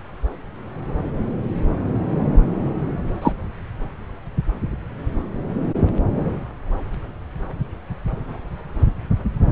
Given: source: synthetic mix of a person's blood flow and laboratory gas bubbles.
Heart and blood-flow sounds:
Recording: Doppler ultrasound of blood flow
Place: subclavian vein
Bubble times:
3.21-3.33 s: bubbles
From the record:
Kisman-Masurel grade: 113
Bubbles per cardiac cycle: 1 to 2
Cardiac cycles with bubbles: 1 to 10%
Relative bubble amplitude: loud (0.450 to 0.775)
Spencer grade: 1 (occasional bubble signal discernible with the cardiac motion signal, with majority of cardiac periods free of bubbles)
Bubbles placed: anywhere in the cardiac cycle

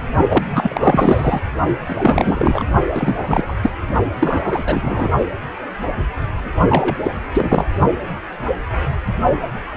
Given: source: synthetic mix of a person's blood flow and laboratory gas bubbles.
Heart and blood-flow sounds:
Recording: Doppler ultrasound of blood flow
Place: precordium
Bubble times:
0.28-1.41 s: bubbles
1.86-2.63 s: bubbles
2.94-3.15 s: bubbles
3.21-3.54 s: bubbles
3.62-3.70 s: bubbles
4.20-4.64 s: bubbles
4.66-5.10 s: bubbles
6.69-6.95 s: bubbles
7.04-7.11 s: bubbles
7.34-7.66 s: bubbles
From the record:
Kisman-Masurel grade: 333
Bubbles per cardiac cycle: rolling drumbeat, 9 or more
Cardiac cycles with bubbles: 50 to 99%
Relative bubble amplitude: loud (0.450 to 0.775)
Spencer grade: 3 (all of the cardiac periods contain showers or single bubble signals, but not dominating or overriding the cardiac motion signals)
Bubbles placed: only in the low amplitude regions of the cardiac cycle

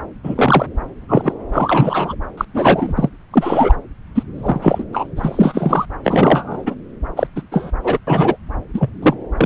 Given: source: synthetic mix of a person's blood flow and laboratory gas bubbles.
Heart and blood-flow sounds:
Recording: Doppler ultrasound of blood flow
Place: subclavian vein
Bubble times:
0.23-0.66 s: bubbles
1.08-1.34 s: bubbles
1.52-2.16 s: bubbles
2.37-2.45 s: bubbles
2.54-3.09 s: bubbles
3.33-3.77 s: bubbles
4.15-4.23 s: bubbles
4.34-4.84 s: bubbles
4.92-5.07 s: bubbles
5.17-5.86 s: bubbles
6.04-6.75 s: bubbles
7.17-7.27 s: bubbles
7.36-7.42 s: bubbles
7.51-7.71 s: bubbles
7.83-7.99 s: bubbles
8.07-8.36 s: bubbles
8.73-8.89 s: bubbles
9.02-9.14 s: bubbles
9.37-9.46 s: bubbles
From the record:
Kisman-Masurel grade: 243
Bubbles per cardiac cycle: several, 3 to 8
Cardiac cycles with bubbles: 100%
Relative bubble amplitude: loud (0.450 to 0.775)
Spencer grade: 3 (all of the cardiac periods contain showers or single bubble signals, but not dominating or overriding the cardiac motion signals)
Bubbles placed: anywhere in the cardiac cycle

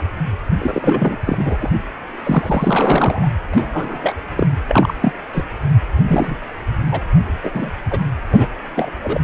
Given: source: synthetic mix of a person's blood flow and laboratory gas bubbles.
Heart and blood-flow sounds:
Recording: Doppler ultrasound of blood flow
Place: precordium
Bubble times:
0.58-1.17 s: bubbles
1.25-1.71 s: bubbles
2.23-3.29 s: bubbles
3.53-4.21 s: bubbles
4.37-4.47 s: bubbles
4.68-4.94 s: bubbles
5.02-5.12 s: bubbles
5.33-5.44 s: bubbles
6.07-6.37 s: bubbles
6.86-7.02 s: bubbles
7.44-7.50 s: bubbles
7.54-7.71 s: bubbles
7.91-8.00 s: bubbles
8.31-8.48 s: bubbles
8.75-8.90 s: bubbles
9.04-9.21 s: bubbles
From the record:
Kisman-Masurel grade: 243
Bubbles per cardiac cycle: several, 3 to 8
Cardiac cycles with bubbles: 100%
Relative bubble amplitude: loud (0.450 to 0.775)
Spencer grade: 3 (all of the cardiac periods contain showers or single bubble signals, but not dominating or overriding the cardiac motion signals)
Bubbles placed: anywhere in the cardiac cycle

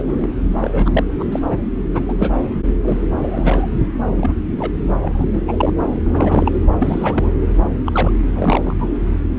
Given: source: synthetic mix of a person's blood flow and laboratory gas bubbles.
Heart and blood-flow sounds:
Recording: Doppler ultrasound of blood flow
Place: subclavian vein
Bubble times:
0.00-0.30 s: bubbles
0.60-1.03 s: bubbles
1.19-1.25 s: bubbles
1.31-1.40 s: bubbles
1.49-1.57 s: bubbles
1.94-2.02 s: bubbles
2.08-2.14 s: bubbles
2.19-2.31 s: bubbles
2.82-3.00 s: bubbles
3.15-3.67 s: bubbles
4.17-4.34 s: bubbles
4.57-4.72 s: bubbles
5.02-5.26 s: bubbles
5.34-5.41 s: bubbles
5.48-5.74 s: bubbles
6.04-6.52 s: bubbles
6.78-7.36 s: bubbles
7.86-8.12 s: bubbles
8.35-8.74 s: bubbles
8.79-8.91 s: bubbles
From the record:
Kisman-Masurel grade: 243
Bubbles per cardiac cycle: several, 3 to 8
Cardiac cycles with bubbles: 100%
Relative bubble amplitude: loud (0.450 to 0.775)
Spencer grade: 3 (all of the cardiac periods contain showers or single bubble signals, but not dominating or overriding the cardiac motion signals)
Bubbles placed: anywhere in the cardiac cycle

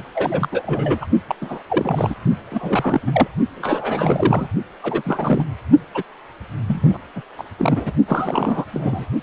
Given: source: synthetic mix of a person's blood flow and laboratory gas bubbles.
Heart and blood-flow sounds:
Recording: Doppler ultrasound of blood flow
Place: precordium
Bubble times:
0.14-0.48 s: bubbles
0.52-1.06 s: bubbles
1.27-1.35 s: bubbles
1.41-1.62 s: bubbles
1.68-2.15 s: bubbles
2.50-3.00 s: bubbles
3.06-3.27 s: bubbles
3.48-4.48 s: bubbles
4.82-5.02 s: bubbles
5.04-5.44 s: bubbles
5.94-6.03 s: bubbles
6.68-6.98 s: bubbles
7.16-7.22 s: bubbles
7.38-7.44 s: bubbles
7.58-7.93 s: bubbles
8.07-8.65 s: bubbles
8.71-9.07 s: bubbles
From the record:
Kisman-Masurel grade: 342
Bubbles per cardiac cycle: rolling drumbeat, 9 or more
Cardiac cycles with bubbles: 100%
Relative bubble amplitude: moderate (0.250 to 0.450)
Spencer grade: 3 (all of the cardiac periods contain showers or single bubble signals, but not dominating or overriding the cardiac motion signals)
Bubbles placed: only in the low amplitude regions of the cardiac cycle

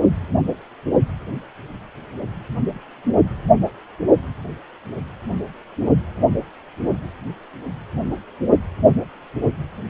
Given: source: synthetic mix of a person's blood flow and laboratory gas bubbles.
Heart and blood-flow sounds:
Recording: Doppler ultrasound of blood flow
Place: precordium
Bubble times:
no bubbles
From the record:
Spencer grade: 0 (complete lack of bubble signals)

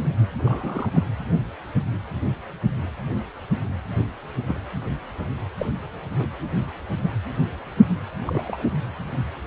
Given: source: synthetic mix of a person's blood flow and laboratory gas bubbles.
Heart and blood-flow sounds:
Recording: Doppler ultrasound of blood flow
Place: precordium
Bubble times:
0.00-0.07 s: bubbles
0.39-0.91 s: bubbles
0.94-1.03 s: bubbles
4.46-4.61 s: bubbles
5.58-5.66 s: bubbles
6.19-6.27 s: bubbles
8.26-8.63 s: bubbles
From the record:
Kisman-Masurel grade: 121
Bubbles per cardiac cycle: 1 to 2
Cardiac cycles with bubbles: 10 to 50%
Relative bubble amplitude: barely perceptible (0.100 to 0.250)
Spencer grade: 2 (many but less than half of the cardiac periods contain bubble signals, singularly or in groups)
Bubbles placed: anywhere in the cardiac cycle

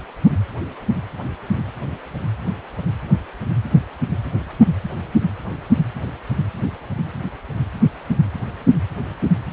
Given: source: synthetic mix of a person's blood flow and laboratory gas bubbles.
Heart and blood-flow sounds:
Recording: Doppler ultrasound of blood flow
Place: precordium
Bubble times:
no bubbles
From the record:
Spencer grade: 0 (complete lack of bubble signals)

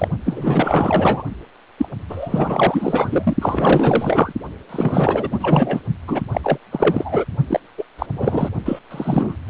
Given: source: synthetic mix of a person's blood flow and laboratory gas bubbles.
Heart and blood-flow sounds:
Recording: Doppler ultrasound of blood flow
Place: precordium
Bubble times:
0.00-0.08 s: bubbles
0.25-1.23 s: bubbles
1.78-1.89 s: bubbles
2.09-4.32 s: bubbles
4.69-5.27 s: bubbles
5.31-5.80 s: bubbles
6.07-6.21 s: bubbles
6.31-6.41 s: bubbles
6.43-6.58 s: bubbles
6.71-7.25 s: bubbles
7.47-7.60 s: bubbles
7.77-7.84 s: bubbles
7.99-8.06 s: bubbles
8.12-8.49 s: bubbles
8.65-8.79 s: bubbles
8.91-9.36 s: bubbles
9.48-9.50 s: bubbles
From the record:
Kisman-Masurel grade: 444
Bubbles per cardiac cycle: continuous sound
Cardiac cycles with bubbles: 100%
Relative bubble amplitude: maximal (0.775 to 0.999)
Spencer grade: 4 (maximum detectable bubble signal sounding continuously throughout systole and diastole of every cardiac period, and overriding the amplitude of the normal cardiac signals)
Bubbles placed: only in the low amplitude regions of the cardiac cycle

